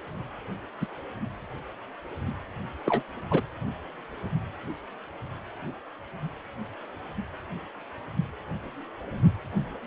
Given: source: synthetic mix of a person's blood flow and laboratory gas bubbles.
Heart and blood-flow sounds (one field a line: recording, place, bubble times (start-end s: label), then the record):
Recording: Doppler ultrasound of blood flow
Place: precordium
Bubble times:
0.81-0.86 s: bubbles
2.86-3.02 s: bubbles
3.31-3.41 s: bubbles
From the record:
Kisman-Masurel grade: 122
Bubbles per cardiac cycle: 1 to 2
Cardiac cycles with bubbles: 10 to 50%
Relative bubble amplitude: moderate (0.250 to 0.450)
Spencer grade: 2 (many but less than half of the cardiac periods contain bubble signals, singularly or in groups)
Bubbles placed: anywhere in the cardiac cycle